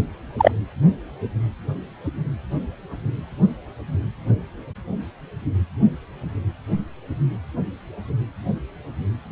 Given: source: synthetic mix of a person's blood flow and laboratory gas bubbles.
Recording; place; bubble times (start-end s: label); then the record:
Doppler ultrasound of blood flow; precordium
0.38-0.51 s: bubbles
From the record:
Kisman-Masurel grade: 113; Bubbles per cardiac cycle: 1 to 2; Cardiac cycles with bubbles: 1 to 10%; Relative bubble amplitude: loud (0.450 to 0.775); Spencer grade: 1 (occasional bubble signal discernible with the cardiac motion signal, with majority of cardiac periods free of bubbles); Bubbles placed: anywhere in the cardiac cycle